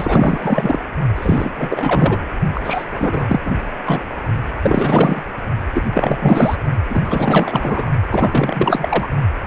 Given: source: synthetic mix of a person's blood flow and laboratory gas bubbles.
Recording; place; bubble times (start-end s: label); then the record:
Doppler ultrasound of blood flow; precordium
0.00-0.79 s: bubbles
1.15-1.50 s: bubbles
1.56-2.18 s: bubbles
2.54-2.60 s: bubbles
2.63-2.84 s: bubbles
2.92-3.41 s: bubbles
3.45-3.51 s: bubbles
3.85-4.04 s: bubbles
4.62-5.21 s: bubbles
5.74-5.83 s: bubbles
5.93-6.57 s: bubbles
6.89-7.00 s: bubbles
7.05-7.91 s: bubbles
8.11-9.09 s: bubbles
From the record:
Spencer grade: 4 (maximum detectable bubble signal sounding continuously throughout systole and diastole of every cardiac period, and overriding the amplitude of the normal cardiac signals); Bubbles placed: only in the low amplitude regions of the cardiac cycle